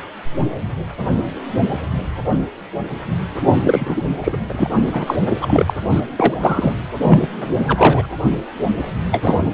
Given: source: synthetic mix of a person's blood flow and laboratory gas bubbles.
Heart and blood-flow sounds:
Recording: Doppler ultrasound of blood flow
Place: precordium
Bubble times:
3.41-3.46 s: bubbles
3.54-4.02 s: bubbles
4.23-4.38 s: bubbles
4.49-4.69 s: bubbles
4.76-4.82 s: bubbles
4.86-5.15 s: bubbles
5.28-5.73 s: bubbles
5.90-6.00 s: bubbles
6.16-6.34 s: bubbles
6.40-6.73 s: bubbles
7.07-7.27 s: bubbles
7.39-8.07 s: bubbles
9.11-9.37 s: bubbles
9.45-9.53 s: bubbles
From the record:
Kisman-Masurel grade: 333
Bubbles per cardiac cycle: rolling drumbeat, 9 or more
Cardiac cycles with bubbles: 50 to 99%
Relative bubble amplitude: loud (0.450 to 0.775)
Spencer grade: 3 (all of the cardiac periods contain showers or single bubble signals, but not dominating or overriding the cardiac motion signals)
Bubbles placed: anywhere in the cardiac cycle

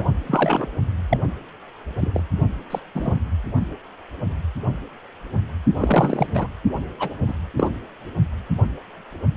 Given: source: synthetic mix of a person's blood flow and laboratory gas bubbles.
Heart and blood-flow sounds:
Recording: Doppler ultrasound of blood flow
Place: precordium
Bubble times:
0.00-0.11 s: bubbles
0.26-0.67 s: bubbles
1.10-1.18 s: bubbles
1.97-2.11 s: bubbles
2.14-2.21 s: bubbles
2.70-2.80 s: bubbles
2.95-3.18 s: bubbles
5.76-6.26 s: bubbles
6.33-6.47 s: bubbles
6.99-7.09 s: bubbles
7.27-7.33 s: bubbles
7.57-7.69 s: bubbles
From the record:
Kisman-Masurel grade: 232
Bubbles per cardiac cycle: several, 3 to 8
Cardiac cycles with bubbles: 50 to 99%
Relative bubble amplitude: moderate (0.250 to 0.450)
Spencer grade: 3 (all of the cardiac periods contain showers or single bubble signals, but not dominating or overriding the cardiac motion signals)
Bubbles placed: only in the low amplitude regions of the cardiac cycle

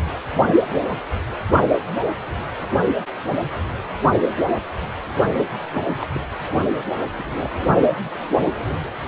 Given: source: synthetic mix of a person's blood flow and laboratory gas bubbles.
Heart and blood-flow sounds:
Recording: Doppler ultrasound of blood flow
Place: precordium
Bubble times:
5.73-5.80 s: bubbles
6.00-6.06 s: bubbles
6.14-6.19 s: bubbles
7.18-7.24 s: bubbles
7.41-7.50 s: bubbles
From the record:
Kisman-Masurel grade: 221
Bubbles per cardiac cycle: several, 3 to 8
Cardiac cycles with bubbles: 10 to 50%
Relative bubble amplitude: barely perceptible (0.100 to 0.250)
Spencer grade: 2 (many but less than half of the cardiac periods contain bubble signals, singularly or in groups)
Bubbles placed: only in the low amplitude regions of the cardiac cycle

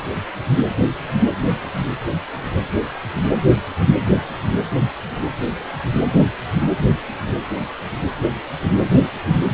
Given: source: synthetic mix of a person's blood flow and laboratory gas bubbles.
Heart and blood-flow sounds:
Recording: Doppler ultrasound of blood flow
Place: precordium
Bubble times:
no bubbles
From the record:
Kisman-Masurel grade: 000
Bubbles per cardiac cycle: 0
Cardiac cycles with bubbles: 0%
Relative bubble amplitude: no bubbles discernible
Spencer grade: 0 (complete lack of bubble signals)

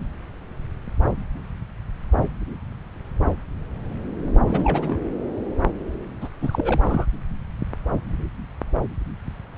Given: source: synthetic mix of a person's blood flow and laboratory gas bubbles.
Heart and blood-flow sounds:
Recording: Doppler ultrasound of blood flow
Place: subclavian vein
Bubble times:
4.46-4.98 s: bubbles
6.21-6.29 s: bubbles
6.42-7.06 s: bubbles
From the record:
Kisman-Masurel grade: 221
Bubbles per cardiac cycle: several, 3 to 8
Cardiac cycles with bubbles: 10 to 50%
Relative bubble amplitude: barely perceptible (0.100 to 0.250)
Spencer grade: 2 (many but less than half of the cardiac periods contain bubble signals, singularly or in groups)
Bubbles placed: anywhere in the cardiac cycle

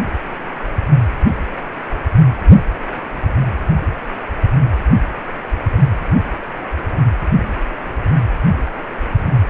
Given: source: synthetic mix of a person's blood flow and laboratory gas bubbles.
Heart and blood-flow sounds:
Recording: Doppler ultrasound of blood flow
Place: precordium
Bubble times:
no bubbles
From the record:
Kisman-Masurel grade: 000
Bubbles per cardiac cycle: 0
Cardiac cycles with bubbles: 0%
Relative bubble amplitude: no bubbles discernible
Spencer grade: 0 (complete lack of bubble signals)

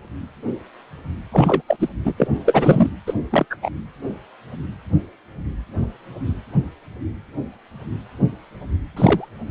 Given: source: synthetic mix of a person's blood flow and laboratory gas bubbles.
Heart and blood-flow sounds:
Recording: Doppler ultrasound of blood flow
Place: precordium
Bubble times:
1.32-1.62 s: bubbles
1.68-1.77 s: bubbles
1.79-1.89 s: bubbles
2.05-2.13 s: bubbles
2.18-2.27 s: bubbles
2.46-2.90 s: bubbles
3.06-3.14 s: bubbles
3.31-3.46 s: bubbles
3.50-3.56 s: bubbles
3.62-3.70 s: bubbles
8.96-9.29 s: bubbles
From the record:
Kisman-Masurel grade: 223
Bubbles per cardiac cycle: several, 3 to 8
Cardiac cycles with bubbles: 10 to 50%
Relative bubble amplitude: loud (0.450 to 0.775)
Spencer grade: 2 (many but less than half of the cardiac periods contain bubble signals, singularly or in groups)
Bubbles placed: anywhere in the cardiac cycle

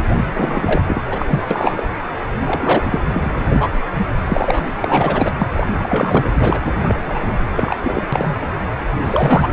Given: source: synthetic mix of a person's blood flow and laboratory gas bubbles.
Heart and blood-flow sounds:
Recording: Doppler ultrasound of blood flow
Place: precordium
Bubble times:
0.00-0.02 s: bubbles
0.33-0.83 s: bubbles
0.87-1.02 s: bubbles
1.10-1.48 s: bubbles
1.50-1.82 s: bubbles
2.47-2.99 s: bubbles
3.13-3.69 s: bubbles
4.22-4.66 s: bubbles
4.81-5.29 s: bubbles
5.38-5.50 s: bubbles
5.53-5.67 s: bubbles
5.83-6.25 s: bubbles
6.34-6.60 s: bubbles
6.82-6.95 s: bubbles
7.06-7.33 s: bubbles
7.55-7.76 s: bubbles
7.79-8.02 s: bubbles
8.12-8.35 s: bubbles
9.04-9.48 s: bubbles
From the record:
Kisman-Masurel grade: 233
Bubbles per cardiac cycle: several, 3 to 8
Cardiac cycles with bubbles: 50 to 99%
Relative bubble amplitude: loud (0.450 to 0.775)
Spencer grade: 3 (all of the cardiac periods contain showers or single bubble signals, but not dominating or overriding the cardiac motion signals)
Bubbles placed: anywhere in the cardiac cycle

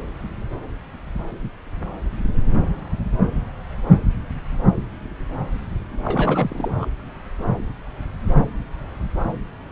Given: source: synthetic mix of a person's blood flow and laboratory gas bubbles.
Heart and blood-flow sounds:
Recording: Doppler ultrasound of blood flow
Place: subclavian vein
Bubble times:
6.04-6.86 s: bubbles
From the record:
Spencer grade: 1 (occasional bubble signal discernible with the cardiac motion signal, with majority of cardiac periods free of bubbles)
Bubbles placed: anywhere in the cardiac cycle

